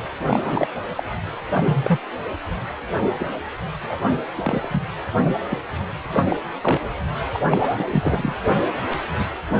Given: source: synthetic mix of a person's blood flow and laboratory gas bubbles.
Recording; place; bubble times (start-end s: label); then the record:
Doppler ultrasound of blood flow; precordium
0.04-0.07 s: bubbles
0.26-0.39 s: bubbles
0.44-0.68 s: bubbles
0.96-1.03 s: bubbles
1.54-1.97 s: bubbles
3.18-3.26 s: bubbles
3.81-4.06 s: bubbles
4.38-4.68 s: bubbles
4.71-4.82 s: bubbles
5.26-5.34 s: bubbles
5.50-5.57 s: bubbles
6.15-6.25 s: bubbles
6.27-6.38 s: bubbles
6.61-6.80 s: bubbles
7.33-7.40 s: bubbles
7.49-7.75 s: bubbles
7.79-7.85 s: bubbles
7.89-8.36 s: bubbles
8.90-9.03 s: bubbles
9.19-9.26 s: bubbles
9.49-9.60 s: bubbles
From the record:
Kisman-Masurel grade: 242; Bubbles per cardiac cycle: several, 3 to 8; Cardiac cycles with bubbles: 100%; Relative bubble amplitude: moderate (0.250 to 0.450); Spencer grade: 3 (all of the cardiac periods contain showers or single bubble signals, but not dominating or overriding the cardiac motion signals); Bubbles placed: anywhere in the cardiac cycle